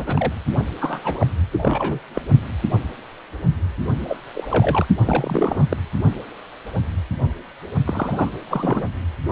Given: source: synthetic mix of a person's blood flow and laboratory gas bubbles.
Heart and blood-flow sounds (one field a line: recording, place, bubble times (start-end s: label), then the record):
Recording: Doppler ultrasound of blood flow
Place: precordium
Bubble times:
0.00-0.33 s: bubbles
0.80-1.27 s: bubbles
1.52-2.00 s: bubbles
2.14-2.21 s: bubbles
4.08-4.17 s: bubbles
4.33-4.86 s: bubbles
5.05-5.66 s: bubbles
5.70-5.77 s: bubbles
7.84-8.29 s: bubbles
8.50-8.82 s: bubbles
From the record:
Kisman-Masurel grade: 233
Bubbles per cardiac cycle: several, 3 to 8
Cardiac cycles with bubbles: 50 to 99%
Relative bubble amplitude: loud (0.450 to 0.775)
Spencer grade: 3 (all of the cardiac periods contain showers or single bubble signals, but not dominating or overriding the cardiac motion signals)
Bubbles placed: only in the low amplitude regions of the cardiac cycle